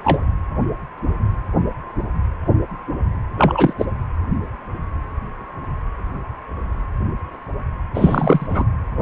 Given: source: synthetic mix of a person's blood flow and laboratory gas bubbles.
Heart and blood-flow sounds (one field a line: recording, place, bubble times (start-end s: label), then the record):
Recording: Doppler ultrasound of blood flow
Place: precordium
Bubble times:
0.02-0.28 s: bubbles
3.38-3.73 s: bubbles
3.78-3.85 s: bubbles
7.94-8.64 s: bubbles
From the record:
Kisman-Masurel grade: 223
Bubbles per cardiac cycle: several, 3 to 8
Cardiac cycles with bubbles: 10 to 50%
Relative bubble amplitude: loud (0.450 to 0.775)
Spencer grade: 2 (many but less than half of the cardiac periods contain bubble signals, singularly or in groups)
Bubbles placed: anywhere in the cardiac cycle